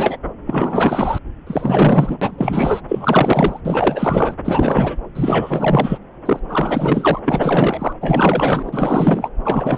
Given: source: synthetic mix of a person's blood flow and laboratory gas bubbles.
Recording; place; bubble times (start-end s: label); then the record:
Doppler ultrasound of blood flow; subclavian vein
0.00-0.17 s: bubbles
0.46-1.18 s: bubbles
1.46-2.18 s: bubbles
2.21-2.81 s: bubbles
2.88-3.61 s: bubbles
3.65-4.34 s: bubbles
4.45-4.96 s: bubbles
5.15-5.98 s: bubbles
6.25-6.39 s: bubbles
6.49-7.19 s: bubbles
7.25-7.93 s: bubbles
8.01-9.29 s: bubbles
9.44-9.78 s: bubbles
From the record:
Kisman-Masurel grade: 444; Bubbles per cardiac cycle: continuous sound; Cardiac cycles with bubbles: 100%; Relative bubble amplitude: maximal (0.775 to 0.999); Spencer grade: 4 (maximum detectable bubble signal sounding continuously throughout systole and diastole of every cardiac period, and overriding the amplitude of the normal cardiac signals); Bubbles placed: anywhere in the cardiac cycle